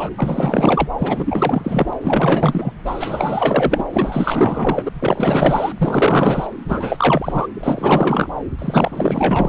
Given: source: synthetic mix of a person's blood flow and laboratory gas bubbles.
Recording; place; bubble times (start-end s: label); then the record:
Doppler ultrasound of blood flow; subclavian vein
0.00-0.10 s: bubbles
0.17-0.89 s: bubbles
0.98-1.94 s: bubbles
2.02-2.73 s: bubbles
2.85-3.85 s: bubbles
3.92-4.89 s: bubbles
4.95-5.72 s: bubbles
5.78-6.47 s: bubbles
6.68-7.47 s: bubbles
7.55-8.29 s: bubbles
8.59-9.49 s: bubbles
From the record:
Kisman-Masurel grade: 444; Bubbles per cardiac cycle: continuous sound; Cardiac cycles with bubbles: 100%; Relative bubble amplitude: maximal (0.775 to 0.999); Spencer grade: 4 (maximum detectable bubble signal sounding continuously throughout systole and diastole of every cardiac period, and overriding the amplitude of the normal cardiac signals); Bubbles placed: anywhere in the cardiac cycle